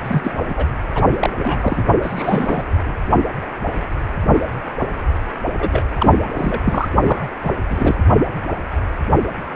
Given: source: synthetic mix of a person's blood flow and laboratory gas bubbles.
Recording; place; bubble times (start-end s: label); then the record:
Doppler ultrasound of blood flow; precordium
0.03-0.32 s: bubbles
0.48-0.66 s: bubbles
0.94-1.03 s: bubbles
1.06-1.30 s: bubbles
1.37-1.85 s: bubbles
2.02-2.64 s: bubbles
2.67-3.08 s: bubbles
5.58-5.85 s: bubbles
5.95-6.15 s: bubbles
6.33-6.61 s: bubbles
6.65-6.88 s: bubbles
7.01-7.29 s: bubbles
7.44-7.51 s: bubbles
7.70-7.95 s: bubbles
From the record:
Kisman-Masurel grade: 332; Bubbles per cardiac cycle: rolling drumbeat, 9 or more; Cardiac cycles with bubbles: 50 to 99%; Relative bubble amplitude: moderate (0.250 to 0.450); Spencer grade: 3 (all of the cardiac periods contain showers or single bubble signals, but not dominating or overriding the cardiac motion signals); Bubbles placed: only in the low amplitude regions of the cardiac cycle